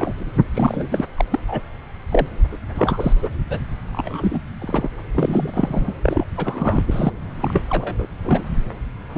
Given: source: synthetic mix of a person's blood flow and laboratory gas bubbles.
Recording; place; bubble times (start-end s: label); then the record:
Doppler ultrasound of blood flow; subclavian vein
0.00-0.25 s: bubbles
0.54-1.05 s: bubbles
1.17-1.25 s: bubbles
1.30-1.39 s: bubbles
1.48-1.62 s: bubbles
2.10-2.26 s: bubbles
2.51-2.57 s: bubbles
2.74-3.12 s: bubbles
3.22-3.27 s: bubbles
3.49-3.59 s: bubbles
3.92-4.41 s: bubbles
4.60-4.88 s: bubbles
5.12-5.95 s: bubbles
6.02-6.25 s: bubbles
6.37-7.12 s: bubbles
7.41-7.63 s: bubbles
7.69-7.95 s: bubbles
7.98-8.04 s: bubbles
8.24-8.44 s: bubbles
9.15-9.18 s: bubbles
From the record:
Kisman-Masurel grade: 343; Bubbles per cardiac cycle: rolling drumbeat, 9 or more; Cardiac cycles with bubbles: 100%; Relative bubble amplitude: loud (0.450 to 0.775); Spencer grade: 3 (all of the cardiac periods contain showers or single bubble signals, but not dominating or overriding the cardiac motion signals); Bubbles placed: anywhere in the cardiac cycle